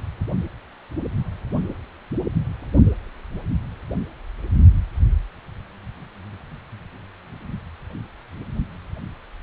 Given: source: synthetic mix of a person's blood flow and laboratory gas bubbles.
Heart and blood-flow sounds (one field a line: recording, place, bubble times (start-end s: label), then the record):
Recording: Doppler ultrasound of blood flow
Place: precordium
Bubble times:
no bubbles
From the record:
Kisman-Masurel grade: 000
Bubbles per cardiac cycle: 0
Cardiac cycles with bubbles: 0%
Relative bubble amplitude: no bubbles discernible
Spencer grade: 0 (complete lack of bubble signals)